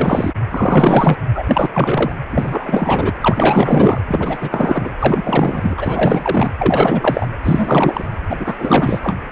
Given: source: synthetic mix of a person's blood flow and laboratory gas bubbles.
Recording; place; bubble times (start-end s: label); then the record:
Doppler ultrasound of blood flow; precordium
0.00-0.33 s: bubbles
0.51-1.17 s: bubbles
1.35-1.44 s: bubbles
1.47-1.69 s: bubbles
1.73-2.12 s: bubbles
2.32-3.12 s: bubbles
3.21-4.00 s: bubbles
4.07-4.38 s: bubbles
4.41-4.90 s: bubbles
4.99-5.75 s: bubbles
5.77-6.51 s: bubbles
6.58-7.27 s: bubbles
7.43-8.05 s: bubbles
8.30-8.37 s: bubbles
8.40-8.99 s: bubbles
9.03-9.16 s: bubbles
From the record:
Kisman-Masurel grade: 444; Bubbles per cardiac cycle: continuous sound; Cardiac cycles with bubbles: 100%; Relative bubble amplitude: maximal (0.775 to 0.999); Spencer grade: 4 (maximum detectable bubble signal sounding continuously throughout systole and diastole of every cardiac period, and overriding the amplitude of the normal cardiac signals); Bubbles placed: anywhere in the cardiac cycle